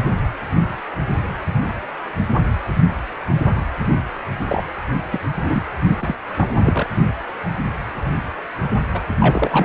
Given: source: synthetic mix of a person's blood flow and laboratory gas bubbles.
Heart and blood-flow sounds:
Doppler ultrasound of blood flow; precordium
4.48-4.63 s: bubbles
5.11-5.19 s: bubbles
5.44-5.63 s: bubbles
6.00-6.16 s: bubbles
6.37-6.88 s: bubbles
8.93-9.01 s: bubbles
9.20-9.65 s: bubbles
From the record:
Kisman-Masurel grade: 222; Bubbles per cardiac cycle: several, 3 to 8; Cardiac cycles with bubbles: 10 to 50%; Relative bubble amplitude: moderate (0.250 to 0.450); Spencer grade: 2 (many but less than half of the cardiac periods contain bubble signals, singularly or in groups); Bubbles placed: only in the low amplitude regions of the cardiac cycle

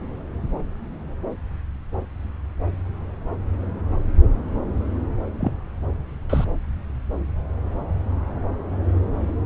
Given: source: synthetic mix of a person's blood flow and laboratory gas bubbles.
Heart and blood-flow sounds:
Doppler ultrasound of blood flow; subclavian vein
5.40-5.53 s: bubbles
6.29-6.45 s: bubbles
From the record:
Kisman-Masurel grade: 112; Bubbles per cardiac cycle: 1 to 2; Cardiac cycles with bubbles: 1 to 10%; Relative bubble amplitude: moderate (0.250 to 0.450); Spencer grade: 1 (occasional bubble signal discernible with the cardiac motion signal, with majority of cardiac periods free of bubbles); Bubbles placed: anywhere in the cardiac cycle

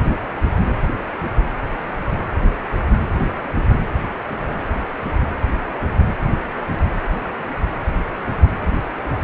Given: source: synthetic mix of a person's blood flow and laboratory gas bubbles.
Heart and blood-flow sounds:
Doppler ultrasound of blood flow; precordium
no bubbles
From the record:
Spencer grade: 0 (complete lack of bubble signals)

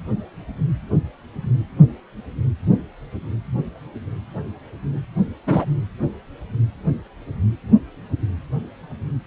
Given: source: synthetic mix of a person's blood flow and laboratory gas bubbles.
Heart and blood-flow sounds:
Doppler ultrasound of blood flow; precordium
5.46-5.65 s: bubbles
From the record:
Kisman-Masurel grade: 112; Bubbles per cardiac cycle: 1 to 2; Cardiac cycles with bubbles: 1 to 10%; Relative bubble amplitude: moderate (0.250 to 0.450); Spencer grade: 1 (occasional bubble signal discernible with the cardiac motion signal, with majority of cardiac periods free of bubbles); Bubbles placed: anywhere in the cardiac cycle

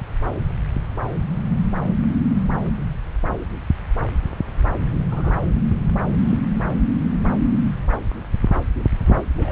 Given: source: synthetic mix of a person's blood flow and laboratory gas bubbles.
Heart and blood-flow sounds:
Doppler ultrasound of blood flow; subclavian vein
5.10-5.39 s: bubbles
5.55-5.61 s: bubbles
6.17-6.36 s: bubbles
9.05-9.13 s: bubbles
9.38-9.52 s: bubbles
From the record:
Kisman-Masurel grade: 221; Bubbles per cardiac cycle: several, 3 to 8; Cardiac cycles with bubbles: 10 to 50%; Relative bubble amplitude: barely perceptible (0.100 to 0.250); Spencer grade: 2 (many but less than half of the cardiac periods contain bubble signals, singularly or in groups); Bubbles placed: anywhere in the cardiac cycle

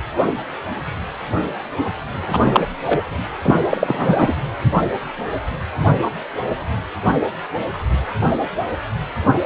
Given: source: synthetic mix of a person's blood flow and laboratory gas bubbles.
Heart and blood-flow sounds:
Doppler ultrasound of blood flow; precordium
2.27-2.66 s: bubbles
2.87-3.00 s: bubbles
3.42-3.56 s: bubbles
3.70-4.34 s: bubbles
From the record:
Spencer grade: 2 (many but less than half of the cardiac periods contain bubble signals, singularly or in groups); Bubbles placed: anywhere in the cardiac cycle

